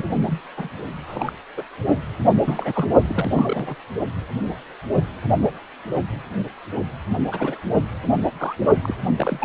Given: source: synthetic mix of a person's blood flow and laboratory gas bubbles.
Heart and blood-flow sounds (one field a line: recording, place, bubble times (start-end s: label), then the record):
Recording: Doppler ultrasound of blood flow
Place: precordium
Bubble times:
0.00-0.02 s: bubbles
0.26-0.40 s: bubbles
0.56-0.69 s: bubbles
1.06-1.32 s: bubbles
1.57-1.64 s: bubbles
2.42-2.89 s: bubbles
3.04-3.75 s: bubbles
7.31-7.58 s: bubbles
8.38-8.56 s: bubbles
8.82-8.96 s: bubbles
9.16-9.44 s: bubbles
From the record:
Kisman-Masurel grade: 232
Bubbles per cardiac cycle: several, 3 to 8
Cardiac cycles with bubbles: 50 to 99%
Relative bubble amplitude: moderate (0.250 to 0.450)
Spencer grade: 3 (all of the cardiac periods contain showers or single bubble signals, but not dominating or overriding the cardiac motion signals)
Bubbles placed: only in the low amplitude regions of the cardiac cycle